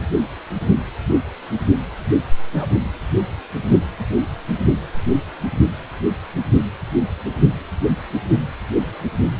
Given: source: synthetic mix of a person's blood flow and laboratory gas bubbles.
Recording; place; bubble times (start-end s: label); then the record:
Doppler ultrasound of blood flow; precordium
2.53-2.67 s: bubbles
From the record:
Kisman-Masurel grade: 122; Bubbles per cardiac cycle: 1 to 2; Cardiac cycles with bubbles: 10 to 50%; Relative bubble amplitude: moderate (0.250 to 0.450); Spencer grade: 2 (many but less than half of the cardiac periods contain bubble signals, singularly or in groups); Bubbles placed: only in the low amplitude regions of the cardiac cycle